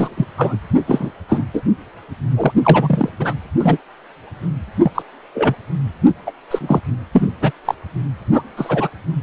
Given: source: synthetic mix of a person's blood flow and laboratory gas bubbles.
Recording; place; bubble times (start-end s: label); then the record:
Doppler ultrasound of blood flow; precordium
0.00-0.27 s: bubbles
0.37-0.56 s: bubbles
0.86-1.10 s: bubbles
1.28-1.45 s: bubbles
1.53-1.62 s: bubbles
2.36-2.52 s: bubbles
2.63-3.09 s: bubbles
3.20-3.34 s: bubbles
3.60-3.78 s: bubbles
4.83-4.91 s: bubbles
4.95-5.02 s: bubbles
5.34-5.54 s: bubbles
6.07-6.09 s: bubbles
6.27-6.32 s: bubbles
6.50-6.81 s: bubbles
7.13-7.27 s: bubbles
7.41-7.51 s: bubbles
7.65-7.75 s: bubbles
8.33-8.42 s: bubbles
8.56-8.88 s: bubbles
From the record:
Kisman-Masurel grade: 243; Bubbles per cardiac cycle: several, 3 to 8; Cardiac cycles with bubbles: 100%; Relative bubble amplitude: loud (0.450 to 0.775); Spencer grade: 3 (all of the cardiac periods contain showers or single bubble signals, but not dominating or overriding the cardiac motion signals); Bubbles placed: anywhere in the cardiac cycle